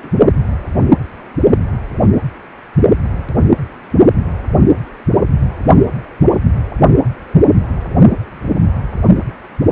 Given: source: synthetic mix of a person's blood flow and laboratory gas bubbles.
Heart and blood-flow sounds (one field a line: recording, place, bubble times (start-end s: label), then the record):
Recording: Doppler ultrasound of blood flow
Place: precordium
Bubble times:
0.02-0.11 s: bubbles
From the record:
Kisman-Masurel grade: 211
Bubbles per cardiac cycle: several, 3 to 8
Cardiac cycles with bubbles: 1 to 10%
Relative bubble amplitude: barely perceptible (0.100 to 0.250)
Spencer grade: 1 (occasional bubble signal discernible with the cardiac motion signal, with majority of cardiac periods free of bubbles)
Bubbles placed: only in the low amplitude regions of the cardiac cycle